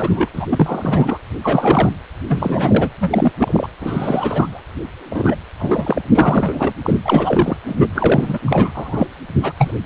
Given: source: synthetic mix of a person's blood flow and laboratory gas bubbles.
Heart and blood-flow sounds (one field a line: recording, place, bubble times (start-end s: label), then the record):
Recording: Doppler ultrasound of blood flow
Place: precordium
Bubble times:
0.00-0.29 s: bubbles
0.32-1.18 s: bubbles
1.42-1.91 s: bubbles
2.28-2.90 s: bubbles
3.00-3.32 s: bubbles
3.38-3.67 s: bubbles
3.80-4.61 s: bubbles
5.10-5.36 s: bubbles
5.59-6.02 s: bubbles
6.15-6.74 s: bubbles
6.84-7.00 s: bubbles
7.03-7.57 s: bubbles
7.67-7.88 s: bubbles
7.95-8.39 s: bubbles
8.44-9.08 s: bubbles
9.42-9.53 s: bubbles
9.58-9.71 s: bubbles
9.84-9.86 s: bubbles
From the record:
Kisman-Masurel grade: 343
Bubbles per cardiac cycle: rolling drumbeat, 9 or more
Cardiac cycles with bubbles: 100%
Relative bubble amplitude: loud (0.450 to 0.775)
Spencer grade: 3 (all of the cardiac periods contain showers or single bubble signals, but not dominating or overriding the cardiac motion signals)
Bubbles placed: anywhere in the cardiac cycle